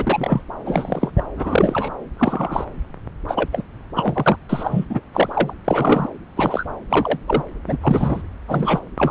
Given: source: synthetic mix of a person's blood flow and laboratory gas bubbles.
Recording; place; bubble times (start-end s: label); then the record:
Doppler ultrasound of blood flow; subclavian vein
0.00-0.42 s: bubbles
0.66-1.11 s: bubbles
1.17-1.23 s: bubbles
1.36-1.91 s: bubbles
2.17-2.65 s: bubbles
3.27-3.49 s: bubbles
3.52-3.62 s: bubbles
3.96-4.37 s: bubbles
4.49-4.85 s: bubbles
4.90-5.00 s: bubbles
5.12-5.54 s: bubbles
5.65-6.08 s: bubbles
6.36-6.67 s: bubbles
6.90-7.19 s: bubbles
7.26-7.43 s: bubbles
7.67-7.77 s: bubbles
7.82-8.22 s: bubbles
8.47-8.88 s: bubbles
8.97-9.11 s: bubbles
From the record:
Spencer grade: 3 (all of the cardiac periods contain showers or single bubble signals, but not dominating or overriding the cardiac motion signals); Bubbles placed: anywhere in the cardiac cycle